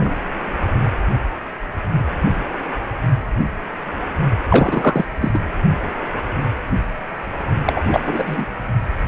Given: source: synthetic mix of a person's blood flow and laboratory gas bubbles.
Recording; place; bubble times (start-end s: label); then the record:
Doppler ultrasound of blood flow; precordium
0.00-0.15 s: bubbles
4.50-5.05 s: bubbles
5.21-5.40 s: bubbles
7.65-7.73 s: bubbles
7.75-8.45 s: bubbles
From the record:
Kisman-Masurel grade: 223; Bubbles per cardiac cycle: several, 3 to 8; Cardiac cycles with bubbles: 10 to 50%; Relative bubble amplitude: loud (0.450 to 0.775); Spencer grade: 2 (many but less than half of the cardiac periods contain bubble signals, singularly or in groups); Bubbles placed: only in the low amplitude regions of the cardiac cycle